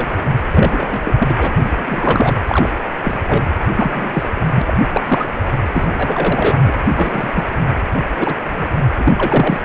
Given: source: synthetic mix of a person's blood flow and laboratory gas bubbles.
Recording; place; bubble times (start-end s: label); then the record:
Doppler ultrasound of blood flow; precordium
0.00-0.12 s: bubbles
0.52-1.15 s: bubbles
1.18-1.35 s: bubbles
1.38-1.51 s: bubbles
1.64-2.34 s: bubbles
2.46-2.69 s: bubbles
3.04-3.19 s: bubbles
3.27-3.43 s: bubbles
3.75-4.29 s: bubbles
4.35-4.48 s: bubbles
4.55-4.62 s: bubbles
4.67-4.74 s: bubbles
4.93-5.29 s: bubbles
5.73-6.72 s: bubbles
6.95-7.44 s: bubbles
8.18-8.34 s: bubbles
8.57-8.66 s: bubbles
8.99-9.13 s: bubbles
9.16-9.60 s: bubbles
From the record:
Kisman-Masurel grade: 243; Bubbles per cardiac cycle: several, 3 to 8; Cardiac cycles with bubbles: 100%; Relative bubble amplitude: loud (0.450 to 0.775); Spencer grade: 3 (all of the cardiac periods contain showers or single bubble signals, but not dominating or overriding the cardiac motion signals); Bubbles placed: anywhere in the cardiac cycle